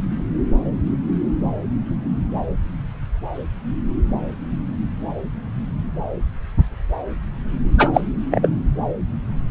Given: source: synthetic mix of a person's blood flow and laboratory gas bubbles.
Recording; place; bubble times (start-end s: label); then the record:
Doppler ultrasound of blood flow; subclavian vein
7.78-7.90 s: bubbles
7.94-8.01 s: bubbles
8.30-8.50 s: bubbles
From the record:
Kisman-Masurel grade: 213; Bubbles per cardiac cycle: several, 3 to 8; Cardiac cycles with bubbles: 1 to 10%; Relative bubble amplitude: loud (0.450 to 0.775); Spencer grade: 1 (occasional bubble signal discernible with the cardiac motion signal, with majority of cardiac periods free of bubbles); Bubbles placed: anywhere in the cardiac cycle